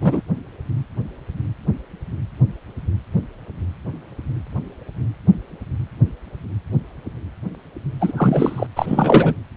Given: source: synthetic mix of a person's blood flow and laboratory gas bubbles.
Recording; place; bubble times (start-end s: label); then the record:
Doppler ultrasound of blood flow; precordium
0.00-0.22 s: bubbles
8.01-8.12 s: bubbles
8.17-8.67 s: bubbles
8.76-9.34 s: bubbles
From the record:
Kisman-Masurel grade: 223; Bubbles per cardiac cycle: several, 3 to 8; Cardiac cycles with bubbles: 10 to 50%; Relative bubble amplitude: loud (0.450 to 0.775); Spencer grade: 2 (many but less than half of the cardiac periods contain bubble signals, singularly or in groups); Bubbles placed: anywhere in the cardiac cycle